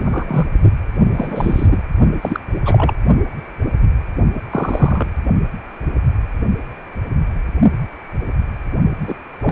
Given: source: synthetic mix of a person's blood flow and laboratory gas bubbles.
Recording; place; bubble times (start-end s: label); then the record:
Doppler ultrasound of blood flow; precordium
0.04-0.47 s: bubbles
1.14-1.83 s: bubbles
2.21-2.40 s: bubbles
2.65-2.94 s: bubbles
4.34-4.41 s: bubbles
4.50-5.10 s: bubbles
9.01-9.17 s: bubbles
9.42-9.52 s: bubbles
From the record:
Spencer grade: 3 (all of the cardiac periods contain showers or single bubble signals, but not dominating or overriding the cardiac motion signals); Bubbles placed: only in the low amplitude regions of the cardiac cycle